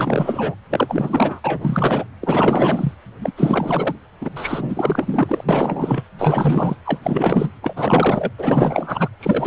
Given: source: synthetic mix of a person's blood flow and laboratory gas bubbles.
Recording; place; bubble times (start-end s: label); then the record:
Doppler ultrasound of blood flow; precordium
0.00-0.55 s: bubbles
0.70-1.41 s: bubbles
1.44-2.05 s: bubbles
2.21-2.95 s: bubbles
3.21-3.31 s: bubbles
3.37-3.95 s: bubbles
4.21-4.30 s: bubbles
4.36-5.44 s: bubbles
5.48-6.03 s: bubbles
6.17-6.75 s: bubbles
6.85-7.49 s: bubbles
7.62-8.32 s: bubbles
8.38-9.09 s: bubbles
9.20-9.47 s: bubbles
From the record:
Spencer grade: 4 (maximum detectable bubble signal sounding continuously throughout systole and diastole of every cardiac period, and overriding the amplitude of the normal cardiac signals); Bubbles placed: anywhere in the cardiac cycle